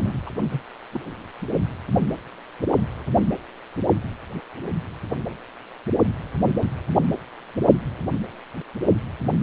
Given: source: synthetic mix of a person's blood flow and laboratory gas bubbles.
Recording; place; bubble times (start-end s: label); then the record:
Doppler ultrasound of blood flow; precordium
0.00-0.16 s: bubbles
0.26-0.30 s: bubbles
0.51-0.62 s: bubbles
0.93-1.00 s: bubbles
From the record:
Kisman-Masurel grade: 221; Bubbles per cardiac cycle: several, 3 to 8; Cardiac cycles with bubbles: 10 to 50%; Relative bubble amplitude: barely perceptible (0.100 to 0.250); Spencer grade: 2 (many but less than half of the cardiac periods contain bubble signals, singularly or in groups); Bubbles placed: only in the low amplitude regions of the cardiac cycle